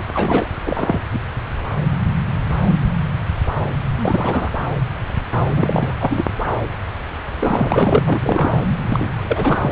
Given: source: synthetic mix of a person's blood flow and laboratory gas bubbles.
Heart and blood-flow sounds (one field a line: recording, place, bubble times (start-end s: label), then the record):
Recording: Doppler ultrasound of blood flow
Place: subclavian vein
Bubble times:
0.14-0.48 s: bubbles
0.66-1.00 s: bubbles
1.13-1.19 s: bubbles
3.95-4.50 s: bubbles
5.56-5.94 s: bubbles
5.99-6.23 s: bubbles
7.40-8.04 s: bubbles
8.06-8.64 s: bubbles
8.88-9.58 s: bubbles
9.62-9.72 s: bubbles
From the record:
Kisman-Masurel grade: 332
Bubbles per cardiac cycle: rolling drumbeat, 9 or more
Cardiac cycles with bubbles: 50 to 99%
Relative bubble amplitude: moderate (0.250 to 0.450)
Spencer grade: 3 (all of the cardiac periods contain showers or single bubble signals, but not dominating or overriding the cardiac motion signals)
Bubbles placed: anywhere in the cardiac cycle